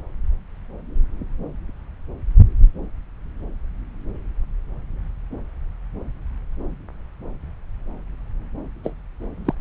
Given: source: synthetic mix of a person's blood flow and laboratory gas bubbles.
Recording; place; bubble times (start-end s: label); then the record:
Doppler ultrasound of blood flow; subclavian vein
8.84-8.94 s: bubbles
9.45-9.54 s: bubbles
From the record:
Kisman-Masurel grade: 122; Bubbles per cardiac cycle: 1 to 2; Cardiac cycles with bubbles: 10 to 50%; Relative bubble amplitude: moderate (0.250 to 0.450); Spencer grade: 2 (many but less than half of the cardiac periods contain bubble signals, singularly or in groups); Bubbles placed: anywhere in the cardiac cycle